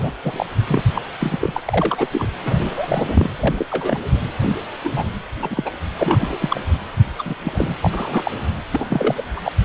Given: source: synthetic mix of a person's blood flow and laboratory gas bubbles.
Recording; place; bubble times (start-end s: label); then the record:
Doppler ultrasound of blood flow; precordium
0.00-0.12 s: bubbles
0.23-0.46 s: bubbles
0.70-0.82 s: bubbles
0.95-1.02 s: bubbles
1.20-1.38 s: bubbles
1.41-1.62 s: bubbles
1.65-2.07 s: bubbles
2.12-2.30 s: bubbles
2.42-3.30 s: bubbles
3.36-3.65 s: bubbles
3.70-3.99 s: bubbles
4.42-4.57 s: bubbles
4.83-5.04 s: bubbles
5.42-5.71 s: bubbles
5.98-6.61 s: bubbles
7.19-7.35 s: bubbles
7.44-7.75 s: bubbles
7.83-8.31 s: bubbles
8.71-8.85 s: bubbles
8.89-9.14 s: bubbles
9.17-9.23 s: bubbles
9.36-9.52 s: bubbles
From the record:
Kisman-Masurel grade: 242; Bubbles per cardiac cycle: several, 3 to 8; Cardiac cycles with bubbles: 100%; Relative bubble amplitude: moderate (0.250 to 0.450); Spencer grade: 3 (all of the cardiac periods contain showers or single bubble signals, but not dominating or overriding the cardiac motion signals); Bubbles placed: anywhere in the cardiac cycle